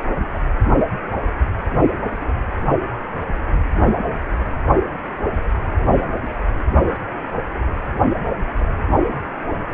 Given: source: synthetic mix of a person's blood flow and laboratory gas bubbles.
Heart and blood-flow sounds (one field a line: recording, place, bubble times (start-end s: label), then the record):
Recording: Doppler ultrasound of blood flow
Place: precordium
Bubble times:
no bubbles
From the record:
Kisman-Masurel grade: 000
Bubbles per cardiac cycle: 0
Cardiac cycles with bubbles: 0%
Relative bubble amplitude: no bubbles discernible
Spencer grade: 0 (complete lack of bubble signals)